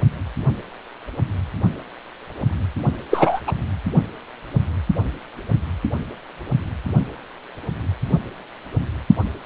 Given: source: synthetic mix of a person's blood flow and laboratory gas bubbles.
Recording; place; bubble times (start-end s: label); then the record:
Doppler ultrasound of blood flow; precordium
3.10-3.40 s: bubbles
3.47-3.52 s: bubbles
From the record:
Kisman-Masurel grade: 213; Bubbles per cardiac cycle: several, 3 to 8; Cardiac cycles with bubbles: 1 to 10%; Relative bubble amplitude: loud (0.450 to 0.775); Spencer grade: 1 (occasional bubble signal discernible with the cardiac motion signal, with majority of cardiac periods free of bubbles); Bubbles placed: only in the low amplitude regions of the cardiac cycle